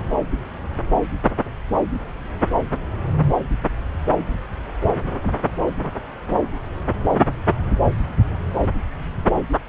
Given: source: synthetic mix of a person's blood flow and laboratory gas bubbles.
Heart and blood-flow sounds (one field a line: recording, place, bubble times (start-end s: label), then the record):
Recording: Doppler ultrasound of blood flow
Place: subclavian vein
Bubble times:
5.82-5.91 s: bubbles
From the record:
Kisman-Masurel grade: 111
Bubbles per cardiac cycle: 1 to 2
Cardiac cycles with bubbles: 1 to 10%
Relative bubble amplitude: barely perceptible (0.100 to 0.250)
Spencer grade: 1 (occasional bubble signal discernible with the cardiac motion signal, with majority of cardiac periods free of bubbles)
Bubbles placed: anywhere in the cardiac cycle